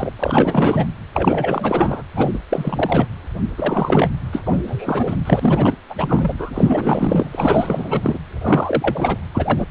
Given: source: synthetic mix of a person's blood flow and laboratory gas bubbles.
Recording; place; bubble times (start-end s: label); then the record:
Doppler ultrasound of blood flow; precordium
0.00-0.10 s: bubbles
0.19-0.85 s: bubbles
1.12-2.03 s: bubbles
2.15-2.39 s: bubbles
2.50-3.07 s: bubbles
3.58-4.11 s: bubbles
4.32-4.42 s: bubbles
4.46-4.62 s: bubbles
4.67-5.17 s: bubbles
5.25-5.73 s: bubbles
5.89-5.95 s: bubbles
5.97-6.34 s: bubbles
6.38-8.19 s: bubbles
8.41-9.18 s: bubbles
9.34-9.66 s: bubbles
From the record:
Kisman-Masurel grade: 444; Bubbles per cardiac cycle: continuous sound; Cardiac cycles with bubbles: 100%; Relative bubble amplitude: maximal (0.775 to 0.999); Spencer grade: 4 (maximum detectable bubble signal sounding continuously throughout systole and diastole of every cardiac period, and overriding the amplitude of the normal cardiac signals); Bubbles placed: anywhere in the cardiac cycle